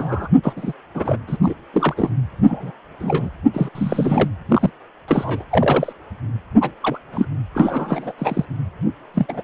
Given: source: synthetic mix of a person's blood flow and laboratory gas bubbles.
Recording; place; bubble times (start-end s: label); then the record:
Doppler ultrasound of blood flow; precordium
0.00-0.28 s: bubbles
0.43-0.53 s: bubbles
0.56-0.72 s: bubbles
0.94-1.19 s: bubbles
1.27-1.38 s: bubbles
1.42-1.55 s: bubbles
1.74-2.10 s: bubbles
2.43-2.72 s: bubbles
3.00-3.29 s: bubbles
3.53-3.69 s: bubbles
3.75-4.29 s: bubbles
4.48-4.70 s: bubbles
5.08-5.44 s: bubbles
5.50-5.92 s: bubbles
6.61-6.71 s: bubbles
6.82-6.98 s: bubbles
7.12-7.25 s: bubbles
7.54-8.12 s: bubbles
8.18-8.45 s: bubbles
9.14-9.26 s: bubbles
9.28-9.42 s: bubbles
From the record:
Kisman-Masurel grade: 242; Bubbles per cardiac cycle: several, 3 to 8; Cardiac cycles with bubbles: 100%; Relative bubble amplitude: moderate (0.250 to 0.450); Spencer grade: 3 (all of the cardiac periods contain showers or single bubble signals, but not dominating or overriding the cardiac motion signals); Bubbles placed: anywhere in the cardiac cycle